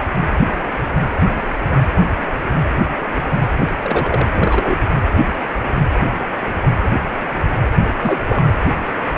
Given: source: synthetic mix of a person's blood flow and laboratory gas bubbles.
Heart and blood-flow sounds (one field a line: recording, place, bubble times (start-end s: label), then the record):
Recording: Doppler ultrasound of blood flow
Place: precordium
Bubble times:
3.82-4.28 s: bubbles
4.34-4.95 s: bubbles
7.76-7.89 s: bubbles
8.01-8.22 s: bubbles
8.24-8.50 s: bubbles
From the record:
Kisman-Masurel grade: 222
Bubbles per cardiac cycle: several, 3 to 8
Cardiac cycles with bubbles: 10 to 50%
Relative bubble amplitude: moderate (0.250 to 0.450)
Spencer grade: 2 (many but less than half of the cardiac periods contain bubble signals, singularly or in groups)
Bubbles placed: anywhere in the cardiac cycle